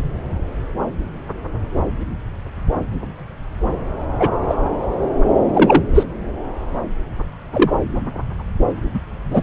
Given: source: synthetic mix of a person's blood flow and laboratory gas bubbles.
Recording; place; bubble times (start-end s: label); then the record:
Doppler ultrasound of blood flow; subclavian vein
4.20-4.29 s: bubbles
4.48-4.55 s: bubbles
5.54-5.83 s: bubbles
5.94-6.04 s: bubbles
7.53-7.71 s: bubbles
8.93-9.00 s: bubbles
9.30-9.41 s: bubbles
From the record:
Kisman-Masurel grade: 123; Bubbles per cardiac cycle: 1 to 2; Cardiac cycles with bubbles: 10 to 50%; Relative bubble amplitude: loud (0.450 to 0.775); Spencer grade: 2 (many but less than half of the cardiac periods contain bubble signals, singularly or in groups); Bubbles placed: anywhere in the cardiac cycle